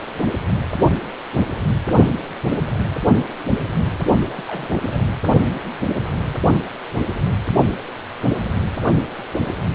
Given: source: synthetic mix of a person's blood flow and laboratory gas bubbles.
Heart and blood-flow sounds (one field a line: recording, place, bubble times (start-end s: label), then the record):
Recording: Doppler ultrasound of blood flow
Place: precordium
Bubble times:
4.29-4.44 s: bubbles
4.47-5.00 s: bubbles
From the record:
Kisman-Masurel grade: 211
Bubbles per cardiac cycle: several, 3 to 8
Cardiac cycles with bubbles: 1 to 10%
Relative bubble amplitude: barely perceptible (0.100 to 0.250)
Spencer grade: 1 (occasional bubble signal discernible with the cardiac motion signal, with majority of cardiac periods free of bubbles)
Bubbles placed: only in the low amplitude regions of the cardiac cycle